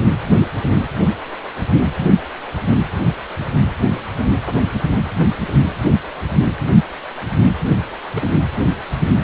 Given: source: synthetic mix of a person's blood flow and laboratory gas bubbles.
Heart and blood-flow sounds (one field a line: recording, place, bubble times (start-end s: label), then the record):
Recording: Doppler ultrasound of blood flow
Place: precordium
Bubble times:
8.13-8.32 s: bubbles
From the record:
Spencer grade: 1 (occasional bubble signal discernible with the cardiac motion signal, with majority of cardiac periods free of bubbles)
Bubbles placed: anywhere in the cardiac cycle